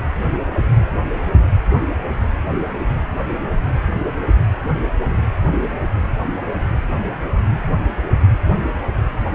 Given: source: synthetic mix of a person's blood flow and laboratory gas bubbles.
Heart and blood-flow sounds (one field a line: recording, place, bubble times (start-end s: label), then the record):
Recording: Doppler ultrasound of blood flow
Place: precordium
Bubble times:
no bubbles
From the record:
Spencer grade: 0 (complete lack of bubble signals)